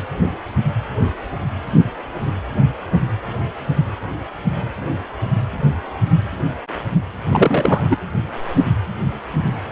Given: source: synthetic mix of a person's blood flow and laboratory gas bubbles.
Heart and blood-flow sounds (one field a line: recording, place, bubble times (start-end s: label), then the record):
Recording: Doppler ultrasound of blood flow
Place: precordium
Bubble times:
7.23-7.84 s: bubbles
7.90-7.97 s: bubbles
From the record:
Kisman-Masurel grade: 222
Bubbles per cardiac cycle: several, 3 to 8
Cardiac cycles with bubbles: 10 to 50%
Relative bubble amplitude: moderate (0.250 to 0.450)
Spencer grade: 2 (many but less than half of the cardiac periods contain bubble signals, singularly or in groups)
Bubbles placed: anywhere in the cardiac cycle